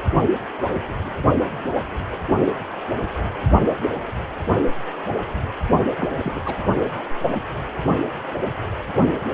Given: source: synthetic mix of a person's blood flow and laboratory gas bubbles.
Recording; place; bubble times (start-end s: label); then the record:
Doppler ultrasound of blood flow; precordium
5.99-6.12 s: bubbles
6.18-6.40 s: bubbles
6.45-6.55 s: bubbles
From the record:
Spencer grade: 1 (occasional bubble signal discernible with the cardiac motion signal, with majority of cardiac periods free of bubbles); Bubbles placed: only in the low amplitude regions of the cardiac cycle